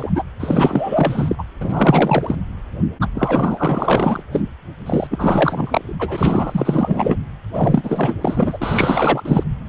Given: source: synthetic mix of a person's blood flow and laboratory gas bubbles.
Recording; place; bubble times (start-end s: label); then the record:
Doppler ultrasound of blood flow; precordium
0.00-0.10 s: bubbles
0.15-0.23 s: bubbles
0.40-1.35 s: bubbles
1.38-1.43 s: bubbles
1.61-2.35 s: bubbles
3.01-3.07 s: bubbles
3.15-4.23 s: bubbles
4.32-4.42 s: bubbles
4.86-5.07 s: bubbles
5.10-5.94 s: bubbles
5.98-7.17 s: bubbles
7.54-8.14 s: bubbles
8.21-9.44 s: bubbles
From the record:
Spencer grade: 4 (maximum detectable bubble signal sounding continuously throughout systole and diastole of every cardiac period, and overriding the amplitude of the normal cardiac signals); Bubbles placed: anywhere in the cardiac cycle